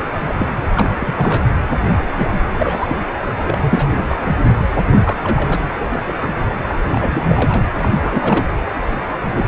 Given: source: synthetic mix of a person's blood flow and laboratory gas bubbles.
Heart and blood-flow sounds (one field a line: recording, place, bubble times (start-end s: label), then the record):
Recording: Doppler ultrasound of blood flow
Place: precordium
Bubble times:
0.14-0.35 s: bubbles
0.38-0.47 s: bubbles
0.75-0.87 s: bubbles
0.99-1.42 s: bubbles
2.16-2.27 s: bubbles
2.58-2.97 s: bubbles
3.41-4.06 s: bubbles
4.09-4.19 s: bubbles
5.04-5.17 s: bubbles
5.23-5.61 s: bubbles
5.73-6.03 s: bubbles
6.07-6.12 s: bubbles
6.21-6.32 s: bubbles
6.62-6.75 s: bubbles
6.90-7.69 s: bubbles
7.79-7.88 s: bubbles
8.01-8.47 s: bubbles
9.26-9.46 s: bubbles
From the record:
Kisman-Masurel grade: 242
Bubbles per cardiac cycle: several, 3 to 8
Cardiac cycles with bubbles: 100%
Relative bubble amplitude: moderate (0.250 to 0.450)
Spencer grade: 3 (all of the cardiac periods contain showers or single bubble signals, but not dominating or overriding the cardiac motion signals)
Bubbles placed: anywhere in the cardiac cycle